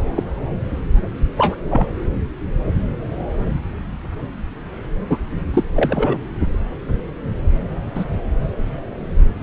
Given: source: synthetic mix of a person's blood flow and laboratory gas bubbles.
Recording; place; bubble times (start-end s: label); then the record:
Doppler ultrasound of blood flow; subclavian vein
0.15-0.25 s: bubbles
1.37-1.55 s: bubbles
1.70-1.86 s: bubbles
5.09-5.17 s: bubbles
5.54-5.64 s: bubbles
5.75-6.20 s: bubbles
7.95-8.04 s: bubbles
From the record:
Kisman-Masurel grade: 123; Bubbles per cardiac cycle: 1 to 2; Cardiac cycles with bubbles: 10 to 50%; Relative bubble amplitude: loud (0.450 to 0.775); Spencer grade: 2 (many but less than half of the cardiac periods contain bubble signals, singularly or in groups); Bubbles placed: anywhere in the cardiac cycle